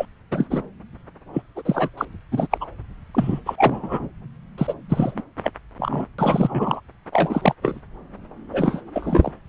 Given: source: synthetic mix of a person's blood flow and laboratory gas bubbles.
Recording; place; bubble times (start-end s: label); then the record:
Doppler ultrasound of blood flow; subclavian vein
0.00-0.06 s: bubbles
0.31-0.46 s: bubbles
0.50-0.62 s: bubbles
1.33-1.42 s: bubbles
1.55-1.62 s: bubbles
1.65-1.89 s: bubbles
1.97-2.05 s: bubbles
2.32-2.47 s: bubbles
2.51-2.58 s: bubbles
2.61-2.66 s: bubbles
3.14-3.40 s: bubbles
3.46-4.08 s: bubbles
4.58-4.74 s: bubbles
4.89-5.24 s: bubbles
5.44-5.51 s: bubbles
5.79-6.06 s: bubbles
6.18-6.81 s: bubbles
7.12-7.54 s: bubbles
7.62-7.80 s: bubbles
8.53-8.80 s: bubbles
8.94-9.32 s: bubbles
From the record:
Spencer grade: 3 (all of the cardiac periods contain showers or single bubble signals, but not dominating or overriding the cardiac motion signals); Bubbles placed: anywhere in the cardiac cycle